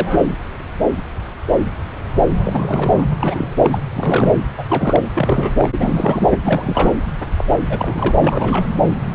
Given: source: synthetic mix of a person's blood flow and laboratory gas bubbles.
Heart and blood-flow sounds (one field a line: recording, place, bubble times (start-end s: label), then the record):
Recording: Doppler ultrasound of blood flow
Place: subclavian vein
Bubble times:
0.00-0.38 s: bubbles
2.44-3.03 s: bubbles
3.20-3.47 s: bubbles
3.63-3.80 s: bubbles
3.93-4.43 s: bubbles
4.58-4.65 s: bubbles
4.68-5.09 s: bubbles
5.16-5.69 s: bubbles
5.77-6.29 s: bubbles
6.43-6.96 s: bubbles
7.37-7.44 s: bubbles
7.69-8.12 s: bubbles
8.21-8.66 s: bubbles
From the record:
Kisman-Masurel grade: 332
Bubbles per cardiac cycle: rolling drumbeat, 9 or more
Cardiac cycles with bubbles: 50 to 99%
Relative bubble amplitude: moderate (0.250 to 0.450)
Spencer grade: 3 (all of the cardiac periods contain showers or single bubble signals, but not dominating or overriding the cardiac motion signals)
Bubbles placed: anywhere in the cardiac cycle